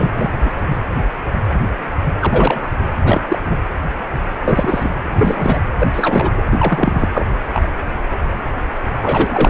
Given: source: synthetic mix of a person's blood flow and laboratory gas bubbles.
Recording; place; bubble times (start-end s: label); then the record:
Doppler ultrasound of blood flow; precordium
0.00-0.38 s: bubbles
0.45-0.50 s: bubbles
2.21-2.71 s: bubbles
3.05-3.21 s: bubbles
3.28-3.38 s: bubbles
3.48-3.57 s: bubbles
4.42-4.90 s: bubbles
5.18-5.60 s: bubbles
5.79-5.88 s: bubbles
5.93-6.42 s: bubbles
6.50-7.08 s: bubbles
7.12-7.25 s: bubbles
7.53-7.71 s: bubbles
9.01-9.49 s: bubbles
From the record:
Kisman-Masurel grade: 233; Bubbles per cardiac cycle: several, 3 to 8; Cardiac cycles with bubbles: 50 to 99%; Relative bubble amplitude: loud (0.450 to 0.775); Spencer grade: 3 (all of the cardiac periods contain showers or single bubble signals, but not dominating or overriding the cardiac motion signals); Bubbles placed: anywhere in the cardiac cycle